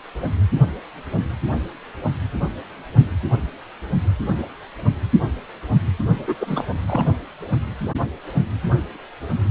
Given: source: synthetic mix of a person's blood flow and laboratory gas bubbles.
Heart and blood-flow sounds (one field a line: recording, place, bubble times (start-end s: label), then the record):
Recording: Doppler ultrasound of blood flow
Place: precordium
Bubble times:
6.28-6.35 s: bubbles
6.39-6.64 s: bubbles
6.88-7.04 s: bubbles
From the record:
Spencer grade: 1 (occasional bubble signal discernible with the cardiac motion signal, with majority of cardiac periods free of bubbles)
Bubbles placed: only in the low amplitude regions of the cardiac cycle